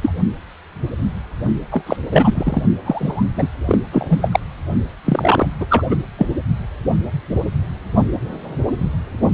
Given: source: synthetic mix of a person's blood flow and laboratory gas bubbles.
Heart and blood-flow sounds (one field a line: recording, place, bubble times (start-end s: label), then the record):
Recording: Doppler ultrasound of blood flow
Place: precordium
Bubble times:
0.00-0.13 s: bubbles
1.71-1.83 s: bubbles
1.86-1.96 s: bubbles
2.12-2.62 s: bubbles
2.85-3.23 s: bubbles
3.36-3.48 s: bubbles
3.67-3.79 s: bubbles
3.92-4.29 s: bubbles
4.32-4.40 s: bubbles
5.04-5.49 s: bubbles
5.60-5.66 s: bubbles
5.68-5.83 s: bubbles
5.90-5.96 s: bubbles
6.17-6.26 s: bubbles
From the record:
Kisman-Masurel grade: 223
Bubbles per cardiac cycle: several, 3 to 8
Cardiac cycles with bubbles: 10 to 50%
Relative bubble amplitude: loud (0.450 to 0.775)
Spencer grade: 2 (many but less than half of the cardiac periods contain bubble signals, singularly or in groups)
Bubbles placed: only in the low amplitude regions of the cardiac cycle